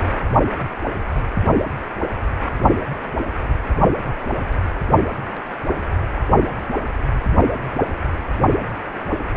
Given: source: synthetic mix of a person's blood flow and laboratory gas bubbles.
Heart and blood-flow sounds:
Doppler ultrasound of blood flow; precordium
no bubbles
From the record:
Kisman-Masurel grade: 000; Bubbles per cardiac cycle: 0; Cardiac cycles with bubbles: 0%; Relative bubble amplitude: no bubbles discernible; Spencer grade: 0 (complete lack of bubble signals)

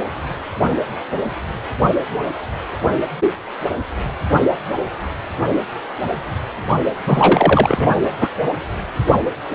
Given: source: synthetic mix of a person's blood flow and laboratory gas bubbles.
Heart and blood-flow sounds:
Doppler ultrasound of blood flow; precordium
7.05-7.91 s: bubbles
8.03-8.12 s: bubbles
8.21-8.29 s: bubbles
From the record:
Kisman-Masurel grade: 213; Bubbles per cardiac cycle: several, 3 to 8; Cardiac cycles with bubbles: 1 to 10%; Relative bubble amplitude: loud (0.450 to 0.775); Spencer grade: 1 (occasional bubble signal discernible with the cardiac motion signal, with majority of cardiac periods free of bubbles); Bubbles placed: anywhere in the cardiac cycle

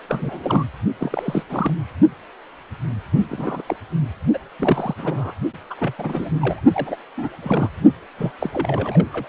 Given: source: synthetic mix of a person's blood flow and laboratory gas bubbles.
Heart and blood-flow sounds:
Doppler ultrasound of blood flow; precordium
0.07-0.65 s: bubbles
0.98-1.43 s: bubbles
1.49-1.73 s: bubbles
3.29-3.62 s: bubbles
3.66-3.76 s: bubbles
4.33-4.38 s: bubbles
4.58-4.94 s: bubbles
4.97-5.33 s: bubbles
5.70-5.75 s: bubbles
5.79-5.93 s: bubbles
5.98-6.29 s: bubbles
6.39-6.60 s: bubbles
6.72-6.96 s: bubbles
7.17-7.29 s: bubbles
7.42-7.69 s: bubbles
8.18-8.32 s: bubbles
8.39-9.29 s: bubbles
From the record:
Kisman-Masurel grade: 332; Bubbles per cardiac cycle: rolling drumbeat, 9 or more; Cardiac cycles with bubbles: 50 to 99%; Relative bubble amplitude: moderate (0.250 to 0.450); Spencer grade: 3 (all of the cardiac periods contain showers or single bubble signals, but not dominating or overriding the cardiac motion signals); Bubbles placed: only in the low amplitude regions of the cardiac cycle

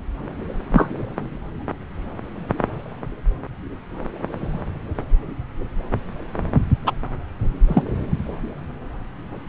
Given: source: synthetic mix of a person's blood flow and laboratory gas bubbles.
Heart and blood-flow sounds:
Doppler ultrasound of blood flow; subclavian vein
0.73-0.89 s: bubbles
6.86-6.92 s: bubbles
7.68-7.83 s: bubbles
From the record:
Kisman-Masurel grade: 123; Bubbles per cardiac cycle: 1 to 2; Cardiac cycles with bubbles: 10 to 50%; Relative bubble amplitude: loud (0.450 to 0.775); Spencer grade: 2 (many but less than half of the cardiac periods contain bubble signals, singularly or in groups); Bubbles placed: anywhere in the cardiac cycle

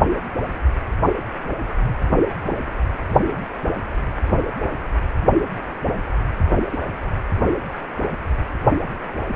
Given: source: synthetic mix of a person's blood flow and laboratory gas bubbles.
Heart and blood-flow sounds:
Doppler ultrasound of blood flow; precordium
6.70-6.79 s: bubbles
From the record:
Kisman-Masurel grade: 111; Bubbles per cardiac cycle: 1 to 2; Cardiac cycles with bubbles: 1 to 10%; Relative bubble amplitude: barely perceptible (0.100 to 0.250); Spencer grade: 1 (occasional bubble signal discernible with the cardiac motion signal, with majority of cardiac periods free of bubbles); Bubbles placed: anywhere in the cardiac cycle

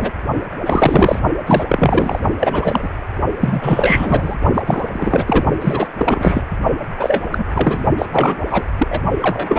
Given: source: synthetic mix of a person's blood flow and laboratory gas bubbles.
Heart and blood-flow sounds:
Doppler ultrasound of blood flow; precordium
0.00-0.11 s: bubbles
0.66-1.19 s: bubbles
1.46-1.64 s: bubbles
1.69-2.19 s: bubbles
2.40-2.89 s: bubbles
3.40-4.35 s: bubbles
4.54-4.62 s: bubbles
4.67-5.24 s: bubbles
5.27-5.44 s: bubbles
5.60-5.87 s: bubbles
5.98-6.43 s: bubbles
6.97-7.23 s: bubbles
7.30-7.45 s: bubbles
7.52-7.85 s: bubbles
7.98-8.05 s: bubbles
8.12-8.65 s: bubbles
8.78-8.88 s: bubbles
8.91-9.00 s: bubbles
9.22-9.58 s: bubbles
From the record:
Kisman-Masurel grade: 343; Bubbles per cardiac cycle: rolling drumbeat, 9 or more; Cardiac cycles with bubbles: 100%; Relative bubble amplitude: loud (0.450 to 0.775); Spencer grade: 3 (all of the cardiac periods contain showers or single bubble signals, but not dominating or overriding the cardiac motion signals); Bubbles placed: only in the low amplitude regions of the cardiac cycle

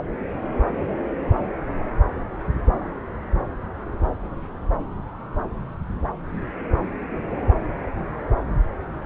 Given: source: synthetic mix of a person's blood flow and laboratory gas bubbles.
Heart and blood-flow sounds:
Doppler ultrasound of blood flow; subclavian vein
no bubbles
From the record:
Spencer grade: 0 (complete lack of bubble signals)

